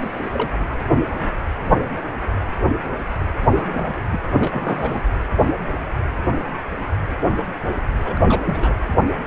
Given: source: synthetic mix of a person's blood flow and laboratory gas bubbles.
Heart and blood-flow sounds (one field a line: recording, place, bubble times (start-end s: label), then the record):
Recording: Doppler ultrasound of blood flow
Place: precordium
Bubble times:
0.01-0.48 s: bubbles
0.59-0.66 s: bubbles
3.48-3.94 s: bubbles
4.11-4.20 s: bubbles
4.33-5.02 s: bubbles
8.04-8.14 s: bubbles
8.17-8.74 s: bubbles
From the record:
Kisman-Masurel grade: 221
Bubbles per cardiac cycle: several, 3 to 8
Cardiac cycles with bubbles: 10 to 50%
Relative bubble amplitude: barely perceptible (0.100 to 0.250)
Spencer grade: 2 (many but less than half of the cardiac periods contain bubble signals, singularly or in groups)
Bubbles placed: anywhere in the cardiac cycle